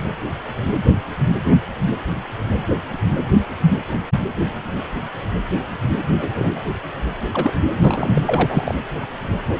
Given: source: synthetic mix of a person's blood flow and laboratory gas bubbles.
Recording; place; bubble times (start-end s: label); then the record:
Doppler ultrasound of blood flow; precordium
6.20-6.50 s: bubbles
7.32-7.53 s: bubbles
7.70-8.21 s: bubbles
8.27-8.75 s: bubbles
From the record:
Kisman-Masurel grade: 222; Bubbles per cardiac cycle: several, 3 to 8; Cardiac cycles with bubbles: 10 to 50%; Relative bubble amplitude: moderate (0.250 to 0.450); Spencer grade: 2 (many but less than half of the cardiac periods contain bubble signals, singularly or in groups); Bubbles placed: anywhere in the cardiac cycle